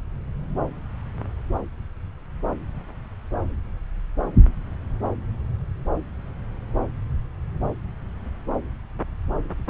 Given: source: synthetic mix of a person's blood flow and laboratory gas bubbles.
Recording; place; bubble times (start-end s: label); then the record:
Doppler ultrasound of blood flow; subclavian vein
no bubbles
From the record:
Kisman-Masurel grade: 000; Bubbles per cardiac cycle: 0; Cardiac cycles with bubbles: 0%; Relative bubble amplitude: no bubbles discernible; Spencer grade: 0 (complete lack of bubble signals)